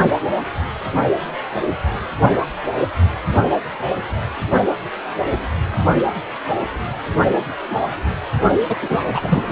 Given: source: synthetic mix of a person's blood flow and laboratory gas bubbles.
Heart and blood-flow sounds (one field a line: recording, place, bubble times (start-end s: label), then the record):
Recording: Doppler ultrasound of blood flow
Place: precordium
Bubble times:
8.68-8.76 s: bubbles
8.82-8.99 s: bubbles
9.14-9.52 s: bubbles
From the record:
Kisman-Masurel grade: 213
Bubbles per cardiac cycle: several, 3 to 8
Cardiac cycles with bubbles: 1 to 10%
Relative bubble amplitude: loud (0.450 to 0.775)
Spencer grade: 1 (occasional bubble signal discernible with the cardiac motion signal, with majority of cardiac periods free of bubbles)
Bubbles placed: only in the low amplitude regions of the cardiac cycle